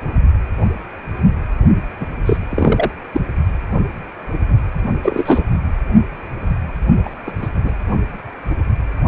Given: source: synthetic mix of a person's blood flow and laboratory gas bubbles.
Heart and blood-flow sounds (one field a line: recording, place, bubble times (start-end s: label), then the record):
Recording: Doppler ultrasound of blood flow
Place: precordium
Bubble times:
2.00-2.06 s: bubbles
2.25-2.37 s: bubbles
2.50-2.91 s: bubbles
3.12-3.20 s: bubbles
5.02-5.44 s: bubbles
7.04-7.10 s: bubbles
7.26-7.32 s: bubbles
7.41-7.50 s: bubbles
7.63-7.72 s: bubbles
From the record:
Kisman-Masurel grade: 223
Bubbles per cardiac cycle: several, 3 to 8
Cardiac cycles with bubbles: 10 to 50%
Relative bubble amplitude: loud (0.450 to 0.775)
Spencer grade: 2 (many but less than half of the cardiac periods contain bubble signals, singularly or in groups)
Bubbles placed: only in the low amplitude regions of the cardiac cycle